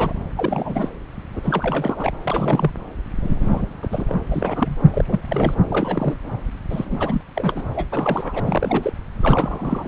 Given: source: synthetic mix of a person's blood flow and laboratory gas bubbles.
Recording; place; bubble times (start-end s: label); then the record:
Doppler ultrasound of blood flow; subclavian vein
0.00-0.14 s: bubbles
0.35-0.89 s: bubbles
1.34-1.40 s: bubbles
1.43-2.12 s: bubbles
2.23-2.71 s: bubbles
3.19-3.66 s: bubbles
3.82-4.14 s: bubbles
4.31-4.77 s: bubbles
4.92-5.54 s: bubbles
5.62-6.16 s: bubbles
6.70-7.22 s: bubbles
7.35-7.62 s: bubbles
7.75-7.87 s: bubbles
7.92-8.40 s: bubbles
8.43-8.93 s: bubbles
9.20-9.88 s: bubbles
From the record:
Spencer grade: 3 (all of the cardiac periods contain showers or single bubble signals, but not dominating or overriding the cardiac motion signals); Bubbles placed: anywhere in the cardiac cycle